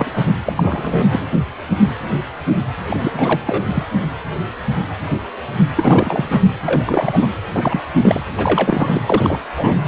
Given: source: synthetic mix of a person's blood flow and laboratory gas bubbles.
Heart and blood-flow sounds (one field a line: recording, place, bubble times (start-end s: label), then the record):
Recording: Doppler ultrasound of blood flow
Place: precordium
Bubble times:
0.00-0.11 s: bubbles
0.17-0.22 s: bubbles
0.45-1.26 s: bubbles
2.89-3.40 s: bubbles
3.46-3.63 s: bubbles
3.75-3.84 s: bubbles
5.76-6.41 s: bubbles
6.65-7.30 s: bubbles
7.53-7.83 s: bubbles
8.01-8.21 s: bubbles
8.37-9.00 s: bubbles
9.05-9.39 s: bubbles
9.56-9.76 s: bubbles
From the record:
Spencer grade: 3 (all of the cardiac periods contain showers or single bubble signals, but not dominating or overriding the cardiac motion signals)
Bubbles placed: anywhere in the cardiac cycle